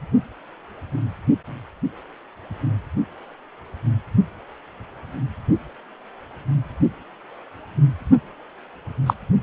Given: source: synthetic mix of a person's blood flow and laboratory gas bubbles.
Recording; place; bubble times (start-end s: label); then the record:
Doppler ultrasound of blood flow; precordium
9.06-9.14 s: bubbles
From the record:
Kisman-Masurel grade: 113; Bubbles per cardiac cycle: 1 to 2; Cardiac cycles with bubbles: 1 to 10%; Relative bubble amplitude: loud (0.450 to 0.775); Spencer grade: 1 (occasional bubble signal discernible with the cardiac motion signal, with majority of cardiac periods free of bubbles); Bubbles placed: only in the low amplitude regions of the cardiac cycle